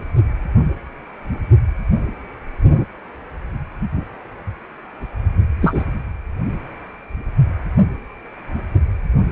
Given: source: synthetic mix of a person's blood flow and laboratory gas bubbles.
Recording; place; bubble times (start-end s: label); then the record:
Doppler ultrasound of blood flow; precordium
5.61-5.83 s: bubbles
From the record:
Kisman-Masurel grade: 113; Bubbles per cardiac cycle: 1 to 2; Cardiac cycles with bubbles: 1 to 10%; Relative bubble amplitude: loud (0.450 to 0.775); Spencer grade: 1 (occasional bubble signal discernible with the cardiac motion signal, with majority of cardiac periods free of bubbles); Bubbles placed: only in the low amplitude regions of the cardiac cycle